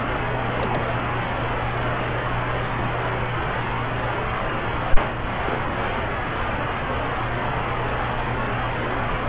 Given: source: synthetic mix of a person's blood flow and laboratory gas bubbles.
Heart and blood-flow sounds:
Doppler ultrasound of blood flow; subclavian vein
0.56-0.84 s: bubbles
2.70-2.88 s: bubbles
5.42-5.57 s: bubbles
7.17-7.23 s: bubbles
From the record:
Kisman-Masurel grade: 121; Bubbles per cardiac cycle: 1 to 2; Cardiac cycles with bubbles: 10 to 50%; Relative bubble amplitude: barely perceptible (0.100 to 0.250); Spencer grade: 2 (many but less than half of the cardiac periods contain bubble signals, singularly or in groups); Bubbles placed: anywhere in the cardiac cycle

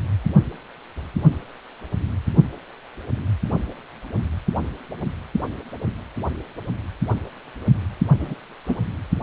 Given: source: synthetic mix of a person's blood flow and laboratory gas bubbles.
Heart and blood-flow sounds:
Doppler ultrasound of blood flow; precordium
8.20-8.35 s: bubbles
8.68-8.86 s: bubbles
From the record:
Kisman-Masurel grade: 122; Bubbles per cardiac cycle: 1 to 2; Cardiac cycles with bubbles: 10 to 50%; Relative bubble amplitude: moderate (0.250 to 0.450); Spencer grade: 2 (many but less than half of the cardiac periods contain bubble signals, singularly or in groups); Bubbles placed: anywhere in the cardiac cycle

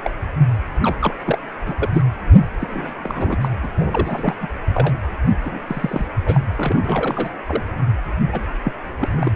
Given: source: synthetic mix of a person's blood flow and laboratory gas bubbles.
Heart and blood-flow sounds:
Doppler ultrasound of blood flow; precordium
0.04-0.12 s: bubbles
0.82-0.96 s: bubbles
1.01-1.14 s: bubbles
1.25-1.39 s: bubbles
1.66-1.74 s: bubbles
1.79-1.89 s: bubbles
1.94-2.02 s: bubbles
2.60-2.92 s: bubbles
3.03-3.38 s: bubbles
3.41-3.48 s: bubbles
3.63-3.68 s: bubbles
3.76-4.35 s: bubbles
4.40-4.48 s: bubbles
4.74-4.93 s: bubbles
5.44-5.60 s: bubbles
5.68-6.07 s: bubbles
6.25-6.40 s: bubbles
6.55-7.36 s: bubbles
7.46-7.63 s: bubbles
8.32-8.40 s: bubbles
8.64-8.72 s: bubbles
8.99-9.36 s: bubbles
From the record:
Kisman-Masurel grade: 232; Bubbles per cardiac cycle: several, 3 to 8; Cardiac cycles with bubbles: 50 to 99%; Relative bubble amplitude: moderate (0.250 to 0.450); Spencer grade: 3 (all of the cardiac periods contain showers or single bubble signals, but not dominating or overriding the cardiac motion signals); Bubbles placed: anywhere in the cardiac cycle

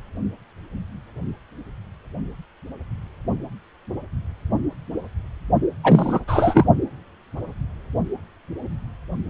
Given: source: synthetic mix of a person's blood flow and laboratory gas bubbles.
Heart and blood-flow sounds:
Doppler ultrasound of blood flow; precordium
5.83-6.20 s: bubbles
6.28-6.66 s: bubbles
From the record:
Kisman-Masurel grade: 213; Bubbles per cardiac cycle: several, 3 to 8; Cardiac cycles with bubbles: 1 to 10%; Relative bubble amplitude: loud (0.450 to 0.775); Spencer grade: 1 (occasional bubble signal discernible with the cardiac motion signal, with majority of cardiac periods free of bubbles); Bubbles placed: only in the low amplitude regions of the cardiac cycle

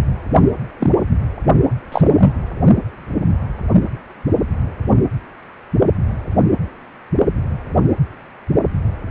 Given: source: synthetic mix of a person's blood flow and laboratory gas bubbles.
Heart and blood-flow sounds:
Doppler ultrasound of blood flow; precordium
0.79-0.91 s: bubbles
1.92-2.33 s: bubbles
From the record:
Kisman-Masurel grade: 123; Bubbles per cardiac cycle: 1 to 2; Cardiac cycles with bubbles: 10 to 50%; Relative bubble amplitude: loud (0.450 to 0.775); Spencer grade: 2 (many but less than half of the cardiac periods contain bubble signals, singularly or in groups); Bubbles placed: only in the low amplitude regions of the cardiac cycle

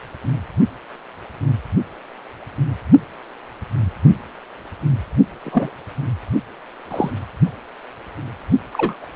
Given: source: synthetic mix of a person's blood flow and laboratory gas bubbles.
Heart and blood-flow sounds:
Doppler ultrasound of blood flow; precordium
5.44-5.71 s: bubbles
6.90-7.10 s: bubbles
8.73-9.05 s: bubbles
From the record:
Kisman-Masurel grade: 122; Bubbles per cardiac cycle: 1 to 2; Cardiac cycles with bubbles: 10 to 50%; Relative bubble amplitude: moderate (0.250 to 0.450); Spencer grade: 2 (many but less than half of the cardiac periods contain bubble signals, singularly or in groups); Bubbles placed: only in the low amplitude regions of the cardiac cycle

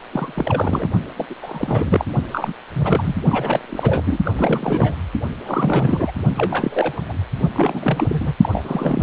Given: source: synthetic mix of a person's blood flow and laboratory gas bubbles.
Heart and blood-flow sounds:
Doppler ultrasound of blood flow; precordium
0.12-0.33 s: bubbles
0.35-0.89 s: bubbles
1.16-1.26 s: bubbles
1.29-1.34 s: bubbles
1.42-2.05 s: bubbles
2.31-2.53 s: bubbles
2.72-3.16 s: bubbles
3.28-4.03 s: bubbles
4.06-4.18 s: bubbles
4.25-4.33 s: bubbles
4.37-4.95 s: bubbles
5.45-6.12 s: bubbles
6.35-7.13 s: bubbles
7.55-8.33 s: bubbles
8.41-8.49 s: bubbles
8.52-9.03 s: bubbles
From the record:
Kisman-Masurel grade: 342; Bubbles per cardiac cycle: rolling drumbeat, 9 or more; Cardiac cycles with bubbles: 100%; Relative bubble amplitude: moderate (0.250 to 0.450); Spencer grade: 3 (all of the cardiac periods contain showers or single bubble signals, but not dominating or overriding the cardiac motion signals); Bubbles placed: only in the low amplitude regions of the cardiac cycle

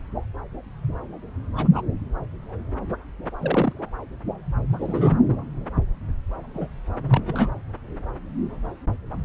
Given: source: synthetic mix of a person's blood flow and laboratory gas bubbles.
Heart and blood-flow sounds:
Doppler ultrasound of blood flow; subclavian vein
1.56-1.67 s: bubbles
1.74-1.81 s: bubbles
3.40-3.73 s: bubbles
4.70-5.18 s: bubbles
6.54-6.68 s: bubbles
7.08-7.50 s: bubbles
From the record:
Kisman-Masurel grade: 122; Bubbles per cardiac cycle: 1 to 2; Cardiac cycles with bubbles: 10 to 50%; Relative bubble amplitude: moderate (0.250 to 0.450); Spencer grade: 2 (many but less than half of the cardiac periods contain bubble signals, singularly or in groups); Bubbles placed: anywhere in the cardiac cycle

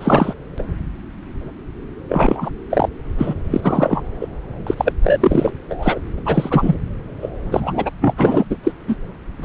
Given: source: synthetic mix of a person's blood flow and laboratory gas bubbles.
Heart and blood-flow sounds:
Doppler ultrasound of blood flow; subclavian vein
0.00-0.34 s: bubbles
0.58-0.62 s: bubbles
2.08-2.50 s: bubbles
2.70-2.89 s: bubbles
3.18-3.34 s: bubbles
3.51-4.02 s: bubbles
4.21-4.27 s: bubbles
4.67-4.75 s: bubbles
4.77-4.93 s: bubbles
5.03-5.51 s: bubbles
5.69-6.00 s: bubbles
6.17-6.19 s: bubbles
6.25-6.75 s: bubbles
7.22-7.29 s: bubbles
7.50-7.91 s: bubbles
8.01-8.14 s: bubbles
8.17-8.45 s: bubbles
8.50-8.57 s: bubbles
8.63-8.72 s: bubbles
8.88-8.96 s: bubbles
9.42-9.45 s: bubbles
From the record:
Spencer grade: 3 (all of the cardiac periods contain showers or single bubble signals, but not dominating or overriding the cardiac motion signals); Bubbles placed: anywhere in the cardiac cycle

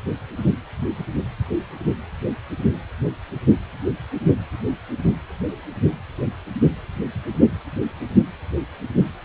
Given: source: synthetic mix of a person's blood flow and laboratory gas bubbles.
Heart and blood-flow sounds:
Doppler ultrasound of blood flow; precordium
no bubbles
From the record:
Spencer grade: 0 (complete lack of bubble signals)

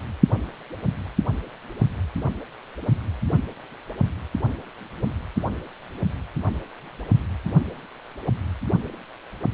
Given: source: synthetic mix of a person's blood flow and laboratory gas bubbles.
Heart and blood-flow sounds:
Doppler ultrasound of blood flow; precordium
no bubbles
From the record:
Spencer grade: 0 (complete lack of bubble signals)

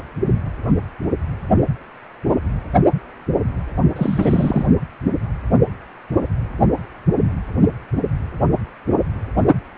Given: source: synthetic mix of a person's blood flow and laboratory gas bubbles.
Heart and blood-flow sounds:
Doppler ultrasound of blood flow; precordium
3.96-4.67 s: bubbles
From the record:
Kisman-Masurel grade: 212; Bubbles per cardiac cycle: several, 3 to 8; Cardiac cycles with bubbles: 1 to 10%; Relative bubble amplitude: moderate (0.250 to 0.450); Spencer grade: 1 (occasional bubble signal discernible with the cardiac motion signal, with majority of cardiac periods free of bubbles); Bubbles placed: only in the low amplitude regions of the cardiac cycle

